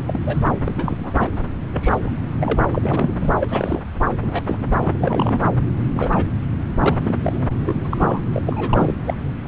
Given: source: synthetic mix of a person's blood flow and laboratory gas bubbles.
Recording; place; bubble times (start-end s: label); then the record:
Doppler ultrasound of blood flow; subclavian vein
0.08-0.20 s: bubbles
0.25-0.44 s: bubbles
0.64-1.12 s: bubbles
1.20-1.29 s: bubbles
1.73-1.98 s: bubbles
2.03-2.10 s: bubbles
2.40-2.64 s: bubbles
2.73-3.33 s: bubbles
3.41-3.81 s: bubbles
4.22-4.41 s: bubbles
4.46-4.58 s: bubbles
4.82-5.40 s: bubbles
5.73-5.83 s: bubbles
5.89-6.24 s: bubbles
6.78-7.15 s: bubbles
7.21-7.81 s: bubbles
7.84-8.20 s: bubbles
8.33-8.42 s: bubbles
8.46-8.94 s: bubbles
9.06-9.15 s: bubbles
9.45-9.48 s: bubbles
From the record:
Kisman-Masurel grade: 242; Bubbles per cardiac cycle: several, 3 to 8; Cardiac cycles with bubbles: 100%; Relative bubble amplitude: moderate (0.250 to 0.450); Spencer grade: 3 (all of the cardiac periods contain showers or single bubble signals, but not dominating or overriding the cardiac motion signals); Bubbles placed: anywhere in the cardiac cycle